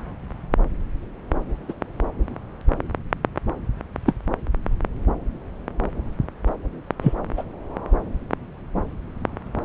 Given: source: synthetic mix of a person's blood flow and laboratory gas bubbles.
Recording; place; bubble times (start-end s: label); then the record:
Doppler ultrasound of blood flow; subclavian vein
1.69-1.73 s: bubbles
4.06-4.13 s: bubbles
7.01-7.13 s: bubbles
7.37-7.42 s: bubbles
From the record:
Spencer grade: 2 (many but less than half of the cardiac periods contain bubble signals, singularly or in groups); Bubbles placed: anywhere in the cardiac cycle